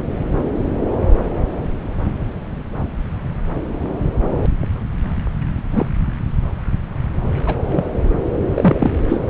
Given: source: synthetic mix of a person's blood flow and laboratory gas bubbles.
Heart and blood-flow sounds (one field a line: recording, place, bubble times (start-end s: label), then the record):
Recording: Doppler ultrasound of blood flow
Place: subclavian vein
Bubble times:
5.71-5.86 s: bubbles
7.46-7.55 s: bubbles
7.67-7.85 s: bubbles
8.54-8.91 s: bubbles
9.09-9.22 s: bubbles
From the record:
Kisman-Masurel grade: 123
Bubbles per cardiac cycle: 1 to 2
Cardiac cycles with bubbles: 10 to 50%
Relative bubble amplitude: loud (0.450 to 0.775)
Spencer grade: 2 (many but less than half of the cardiac periods contain bubble signals, singularly or in groups)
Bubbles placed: anywhere in the cardiac cycle